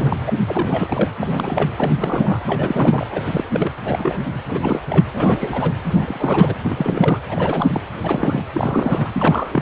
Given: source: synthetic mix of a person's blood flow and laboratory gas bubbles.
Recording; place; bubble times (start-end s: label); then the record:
Doppler ultrasound of blood flow; precordium
0.00-0.17 s: bubbles
0.27-0.33 s: bubbles
0.46-1.10 s: bubbles
1.22-1.71 s: bubbles
1.78-2.40 s: bubbles
2.46-3.07 s: bubbles
3.10-3.43 s: bubbles
3.53-3.72 s: bubbles
3.84-4.26 s: bubbles
4.47-4.80 s: bubbles
4.90-5.04 s: bubbles
5.13-5.71 s: bubbles
5.84-6.54 s: bubbles
6.62-7.20 s: bubbles
7.29-7.81 s: bubbles
8.03-8.46 s: bubbles
8.54-9.61 s: bubbles
From the record:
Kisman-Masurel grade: 342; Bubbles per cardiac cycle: rolling drumbeat, 9 or more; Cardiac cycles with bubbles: 100%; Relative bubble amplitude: moderate (0.250 to 0.450); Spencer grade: 3 (all of the cardiac periods contain showers or single bubble signals, but not dominating or overriding the cardiac motion signals); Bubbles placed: anywhere in the cardiac cycle